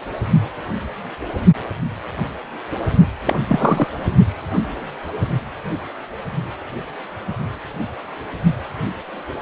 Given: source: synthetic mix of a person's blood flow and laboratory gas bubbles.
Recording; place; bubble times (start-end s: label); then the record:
Doppler ultrasound of blood flow; precordium
3.26-3.35 s: bubbles
3.48-3.87 s: bubbles
From the record:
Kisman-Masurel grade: 212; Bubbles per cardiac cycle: several, 3 to 8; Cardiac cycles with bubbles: 1 to 10%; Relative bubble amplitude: moderate (0.250 to 0.450); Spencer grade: 1 (occasional bubble signal discernible with the cardiac motion signal, with majority of cardiac periods free of bubbles); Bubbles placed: anywhere in the cardiac cycle